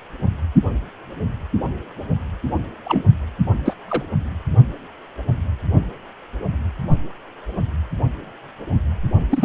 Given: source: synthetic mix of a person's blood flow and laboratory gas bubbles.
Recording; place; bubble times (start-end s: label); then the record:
Doppler ultrasound of blood flow; precordium
2.85-3.03 s: bubbles
3.65-3.74 s: bubbles
3.88-4.03 s: bubbles
9.31-9.44 s: bubbles
From the record:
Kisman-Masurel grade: 122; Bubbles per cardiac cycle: 1 to 2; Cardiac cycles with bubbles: 10 to 50%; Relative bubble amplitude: moderate (0.250 to 0.450); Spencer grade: 2 (many but less than half of the cardiac periods contain bubble signals, singularly or in groups); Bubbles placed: only in the low amplitude regions of the cardiac cycle